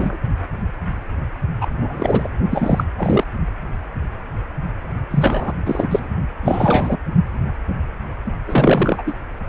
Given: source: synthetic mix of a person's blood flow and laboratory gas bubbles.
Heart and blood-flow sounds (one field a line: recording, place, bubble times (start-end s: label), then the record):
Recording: Doppler ultrasound of blood flow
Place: precordium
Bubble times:
0.00-0.18 s: bubbles
1.61-1.68 s: bubbles
1.79-2.29 s: bubbles
2.50-2.84 s: bubbles
2.98-3.24 s: bubbles
5.10-5.52 s: bubbles
5.65-6.09 s: bubbles
6.42-6.96 s: bubbles
8.46-9.03 s: bubbles
9.06-9.13 s: bubbles
From the record:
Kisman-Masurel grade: 333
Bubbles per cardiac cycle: rolling drumbeat, 9 or more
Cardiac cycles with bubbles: 50 to 99%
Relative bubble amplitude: loud (0.450 to 0.775)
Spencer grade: 3 (all of the cardiac periods contain showers or single bubble signals, but not dominating or overriding the cardiac motion signals)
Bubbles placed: only in the low amplitude regions of the cardiac cycle